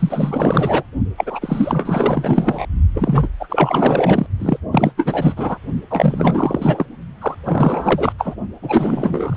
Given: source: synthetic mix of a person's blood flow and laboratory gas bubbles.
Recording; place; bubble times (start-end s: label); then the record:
Doppler ultrasound of blood flow; precordium
0.00-0.83 s: bubbles
1.17-2.66 s: bubbles
2.94-3.29 s: bubbles
3.40-4.26 s: bubbles
4.39-4.58 s: bubbles
4.71-4.92 s: bubbles
4.96-5.34 s: bubbles
5.37-5.58 s: bubbles
5.90-6.85 s: bubbles
7.21-7.34 s: bubbles
7.45-8.12 s: bubbles
8.18-8.35 s: bubbles
8.62-9.37 s: bubbles
From the record:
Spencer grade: 4 (maximum detectable bubble signal sounding continuously throughout systole and diastole of every cardiac period, and overriding the amplitude of the normal cardiac signals); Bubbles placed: only in the low amplitude regions of the cardiac cycle